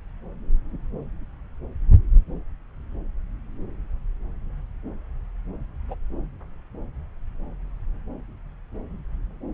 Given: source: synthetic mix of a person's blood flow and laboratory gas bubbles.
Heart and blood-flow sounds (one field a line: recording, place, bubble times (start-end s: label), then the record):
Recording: Doppler ultrasound of blood flow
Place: subclavian vein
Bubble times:
5.88-5.95 s: bubbles
From the record:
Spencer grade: 1 (occasional bubble signal discernible with the cardiac motion signal, with majority of cardiac periods free of bubbles)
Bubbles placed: anywhere in the cardiac cycle